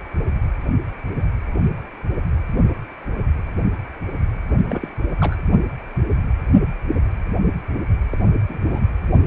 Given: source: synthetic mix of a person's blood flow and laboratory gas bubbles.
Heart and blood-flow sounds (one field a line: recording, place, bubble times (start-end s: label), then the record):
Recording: Doppler ultrasound of blood flow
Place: precordium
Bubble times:
4.67-4.89 s: bubbles
5.21-5.42 s: bubbles
8.11-8.18 s: bubbles
8.49-8.60 s: bubbles
8.69-8.81 s: bubbles
From the record:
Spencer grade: 2 (many but less than half of the cardiac periods contain bubble signals, singularly or in groups)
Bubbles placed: only in the low amplitude regions of the cardiac cycle